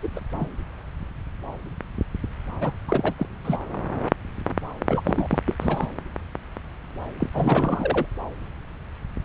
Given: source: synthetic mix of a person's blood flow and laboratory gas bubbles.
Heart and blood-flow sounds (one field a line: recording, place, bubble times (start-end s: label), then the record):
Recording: Doppler ultrasound of blood flow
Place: subclavian vein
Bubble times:
0.03-0.08 s: bubbles
0.16-0.20 s: bubbles
0.35-0.47 s: bubbles
2.60-2.71 s: bubbles
2.88-3.13 s: bubbles
3.17-3.26 s: bubbles
3.44-3.57 s: bubbles
4.88-5.01 s: bubbles
5.04-5.27 s: bubbles
5.30-5.38 s: bubbles
5.46-5.54 s: bubbles
5.60-5.87 s: bubbles
7.20-7.29 s: bubbles
7.33-8.06 s: bubbles
From the record:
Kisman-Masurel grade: 332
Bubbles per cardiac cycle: rolling drumbeat, 9 or more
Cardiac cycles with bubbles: 50 to 99%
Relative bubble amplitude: moderate (0.250 to 0.450)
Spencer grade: 3 (all of the cardiac periods contain showers or single bubble signals, but not dominating or overriding the cardiac motion signals)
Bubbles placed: anywhere in the cardiac cycle